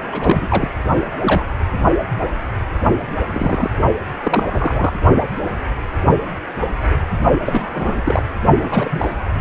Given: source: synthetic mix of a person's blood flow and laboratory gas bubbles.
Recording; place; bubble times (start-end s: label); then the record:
Doppler ultrasound of blood flow; precordium
0.12-0.69 s: bubbles
1.23-1.44 s: bubbles
3.30-3.71 s: bubbles
4.23-4.43 s: bubbles
4.50-4.92 s: bubbles
7.45-8.02 s: bubbles
8.05-8.23 s: bubbles
8.62-9.11 s: bubbles
9.35-9.41 s: bubbles
From the record:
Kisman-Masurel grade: 232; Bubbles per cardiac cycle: several, 3 to 8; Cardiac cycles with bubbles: 50 to 99%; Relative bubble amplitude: moderate (0.250 to 0.450); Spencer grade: 3 (all of the cardiac periods contain showers or single bubble signals, but not dominating or overriding the cardiac motion signals); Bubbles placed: only in the low amplitude regions of the cardiac cycle